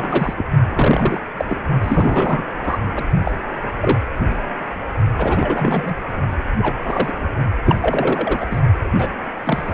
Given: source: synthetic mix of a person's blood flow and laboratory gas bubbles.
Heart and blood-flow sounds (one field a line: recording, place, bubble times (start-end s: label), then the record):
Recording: Doppler ultrasound of blood flow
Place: precordium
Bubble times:
0.00-0.34 s: bubbles
0.36-0.45 s: bubbles
0.69-1.20 s: bubbles
1.37-1.45 s: bubbles
1.47-1.60 s: bubbles
1.82-2.43 s: bubbles
2.63-2.77 s: bubbles
2.95-3.04 s: bubbles
3.23-3.31 s: bubbles
3.80-3.99 s: bubbles
4.29-4.35 s: bubbles
5.18-5.96 s: bubbles
6.58-7.12 s: bubbles
7.66-7.78 s: bubbles
7.82-8.46 s: bubbles
8.50-8.61 s: bubbles
8.98-9.08 s: bubbles
9.43-9.74 s: bubbles
From the record:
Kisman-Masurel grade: 243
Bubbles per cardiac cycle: several, 3 to 8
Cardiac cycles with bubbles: 100%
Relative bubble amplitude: loud (0.450 to 0.775)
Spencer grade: 3 (all of the cardiac periods contain showers or single bubble signals, but not dominating or overriding the cardiac motion signals)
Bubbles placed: only in the low amplitude regions of the cardiac cycle